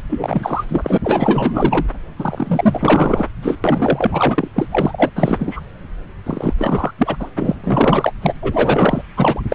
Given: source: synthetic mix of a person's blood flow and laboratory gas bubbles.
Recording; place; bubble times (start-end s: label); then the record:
Doppler ultrasound of blood flow; subclavian vein
0.09-0.64 s: bubbles
0.69-0.98 s: bubbles
1.03-1.86 s: bubbles
2.19-3.27 s: bubbles
3.42-3.58 s: bubbles
3.64-4.48 s: bubbles
4.56-4.67 s: bubbles
4.70-5.11 s: bubbles
5.16-5.60 s: bubbles
6.26-6.53 s: bubbles
6.58-6.91 s: bubbles
6.98-7.17 s: bubbles
7.20-7.29 s: bubbles
7.35-8.12 s: bubbles
8.21-8.34 s: bubbles
8.42-9.02 s: bubbles
9.16-9.41 s: bubbles
9.49-9.54 s: bubbles
From the record:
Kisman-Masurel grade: 444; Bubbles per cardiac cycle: continuous sound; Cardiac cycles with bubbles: 100%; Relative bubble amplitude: maximal (0.775 to 0.999); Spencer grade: 4 (maximum detectable bubble signal sounding continuously throughout systole and diastole of every cardiac period, and overriding the amplitude of the normal cardiac signals); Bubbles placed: anywhere in the cardiac cycle